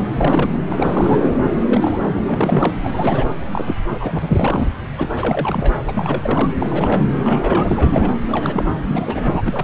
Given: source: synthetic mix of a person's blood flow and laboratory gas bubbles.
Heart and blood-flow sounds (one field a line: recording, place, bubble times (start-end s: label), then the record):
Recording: Doppler ultrasound of blood flow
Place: subclavian vein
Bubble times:
0.14-0.60 s: bubbles
0.70-1.19 s: bubbles
1.47-1.52 s: bubbles
1.64-2.22 s: bubbles
2.27-2.73 s: bubbles
2.83-3.25 s: bubbles
3.52-3.77 s: bubbles
3.89-4.68 s: bubbles
4.97-5.09 s: bubbles
5.14-5.76 s: bubbles
5.88-6.50 s: bubbles
6.60-7.05 s: bubbles
7.12-8.12 s: bubbles
8.25-8.73 s: bubbles
8.88-9.42 s: bubbles
9.45-9.64 s: bubbles
From the record:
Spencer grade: 3 (all of the cardiac periods contain showers or single bubble signals, but not dominating or overriding the cardiac motion signals)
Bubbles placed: anywhere in the cardiac cycle